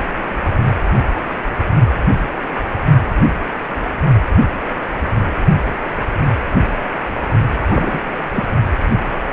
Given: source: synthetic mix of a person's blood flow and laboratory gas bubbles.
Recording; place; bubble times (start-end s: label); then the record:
Doppler ultrasound of blood flow; precordium
7.66-8.00 s: bubbles
8.33-8.46 s: bubbles
From the record:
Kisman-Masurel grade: 212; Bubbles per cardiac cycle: several, 3 to 8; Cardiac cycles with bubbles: 1 to 10%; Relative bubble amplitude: moderate (0.250 to 0.450); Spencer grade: 1 (occasional bubble signal discernible with the cardiac motion signal, with majority of cardiac periods free of bubbles); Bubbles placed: only in the low amplitude regions of the cardiac cycle